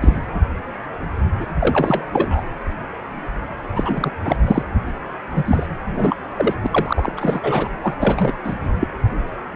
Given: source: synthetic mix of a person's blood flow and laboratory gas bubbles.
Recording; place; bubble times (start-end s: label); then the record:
Doppler ultrasound of blood flow; precordium
0.01-0.26 s: bubbles
1.41-1.46 s: bubbles
1.59-2.06 s: bubbles
2.11-2.42 s: bubbles
3.75-4.10 s: bubbles
4.25-4.36 s: bubbles
4.45-4.64 s: bubbles
5.35-5.67 s: bubbles
5.96-6.16 s: bubbles
6.36-6.54 s: bubbles
6.64-6.67 s: bubbles
6.71-7.12 s: bubbles
7.17-7.69 s: bubbles
7.83-7.96 s: bubbles
7.99-8.32 s: bubbles
8.43-8.54 s: bubbles
8.60-8.68 s: bubbles
8.80-8.88 s: bubbles
From the record:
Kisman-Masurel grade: 332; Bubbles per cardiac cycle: rolling drumbeat, 9 or more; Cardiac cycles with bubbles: 50 to 99%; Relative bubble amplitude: moderate (0.250 to 0.450); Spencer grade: 3 (all of the cardiac periods contain showers or single bubble signals, but not dominating or overriding the cardiac motion signals); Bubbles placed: anywhere in the cardiac cycle